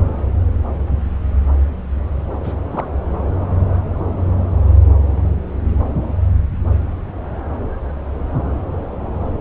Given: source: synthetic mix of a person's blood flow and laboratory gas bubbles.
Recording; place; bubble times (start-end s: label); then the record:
Doppler ultrasound of blood flow; subclavian vein
2.44-2.54 s: bubbles
2.71-2.85 s: bubbles
From the record:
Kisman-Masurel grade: 112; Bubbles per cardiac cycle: 1 to 2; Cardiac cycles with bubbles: 1 to 10%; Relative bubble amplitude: moderate (0.250 to 0.450); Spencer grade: 1 (occasional bubble signal discernible with the cardiac motion signal, with majority of cardiac periods free of bubbles); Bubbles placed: anywhere in the cardiac cycle